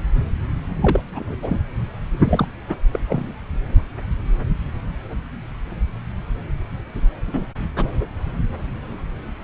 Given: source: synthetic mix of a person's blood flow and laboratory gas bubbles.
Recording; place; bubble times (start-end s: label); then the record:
Doppler ultrasound of blood flow; subclavian vein
0.81-1.01 s: bubbles
1.12-1.36 s: bubbles
1.42-1.60 s: bubbles
2.22-2.47 s: bubbles
2.67-2.75 s: bubbles
2.93-2.99 s: bubbles
3.07-3.34 s: bubbles
7.27-7.44 s: bubbles
7.75-7.89 s: bubbles
From the record:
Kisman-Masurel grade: 222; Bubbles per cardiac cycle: several, 3 to 8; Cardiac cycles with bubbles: 10 to 50%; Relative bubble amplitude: moderate (0.250 to 0.450); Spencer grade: 2 (many but less than half of the cardiac periods contain bubble signals, singularly or in groups); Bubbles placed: anywhere in the cardiac cycle